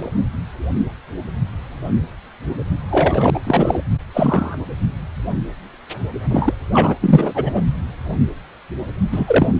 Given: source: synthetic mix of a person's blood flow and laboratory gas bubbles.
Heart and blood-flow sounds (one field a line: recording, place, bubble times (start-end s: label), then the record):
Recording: Doppler ultrasound of blood flow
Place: precordium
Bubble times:
0.00-0.11 s: bubbles
2.91-3.30 s: bubbles
3.34-3.40 s: bubbles
3.44-3.80 s: bubbles
4.13-4.57 s: bubbles
6.30-6.54 s: bubbles
6.71-6.94 s: bubbles
7.01-7.61 s: bubbles
9.12-9.47 s: bubbles
From the record:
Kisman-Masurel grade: 223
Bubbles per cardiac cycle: several, 3 to 8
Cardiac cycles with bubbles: 10 to 50%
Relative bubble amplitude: loud (0.450 to 0.775)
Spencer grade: 2 (many but less than half of the cardiac periods contain bubble signals, singularly or in groups)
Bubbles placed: anywhere in the cardiac cycle